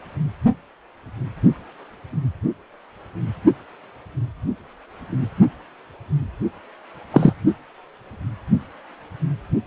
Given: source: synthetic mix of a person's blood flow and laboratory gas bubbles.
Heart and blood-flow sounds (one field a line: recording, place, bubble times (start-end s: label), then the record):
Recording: Doppler ultrasound of blood flow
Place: precordium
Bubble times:
7.10-7.33 s: bubbles
From the record:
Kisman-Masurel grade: 113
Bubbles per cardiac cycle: 1 to 2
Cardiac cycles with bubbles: 1 to 10%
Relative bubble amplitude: loud (0.450 to 0.775)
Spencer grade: 1 (occasional bubble signal discernible with the cardiac motion signal, with majority of cardiac periods free of bubbles)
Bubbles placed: only in the low amplitude regions of the cardiac cycle